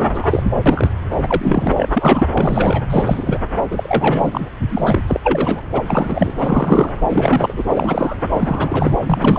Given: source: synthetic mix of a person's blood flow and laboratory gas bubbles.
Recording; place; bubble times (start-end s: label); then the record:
Doppler ultrasound of blood flow; subclavian vein
0.00-0.50 s: bubbles
0.66-0.90 s: bubbles
1.10-1.16 s: bubbles
1.22-1.72 s: bubbles
1.76-1.89 s: bubbles
1.93-2.27 s: bubbles
2.34-2.83 s: bubbles
2.90-3.38 s: bubbles
3.70-4.47 s: bubbles
4.68-5.01 s: bubbles
5.07-5.20 s: bubbles
5.23-5.63 s: bubbles
5.72-5.82 s: bubbles
5.87-6.33 s: bubbles
6.38-7.02 s: bubbles
7.08-7.63 s: bubbles
7.69-8.17 s: bubbles
8.31-8.96 s: bubbles
9.01-9.39 s: bubbles
From the record:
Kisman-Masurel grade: 343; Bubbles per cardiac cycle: rolling drumbeat, 9 or more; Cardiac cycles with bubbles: 100%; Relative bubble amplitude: loud (0.450 to 0.775); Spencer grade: 3 (all of the cardiac periods contain showers or single bubble signals, but not dominating or overriding the cardiac motion signals); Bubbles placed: anywhere in the cardiac cycle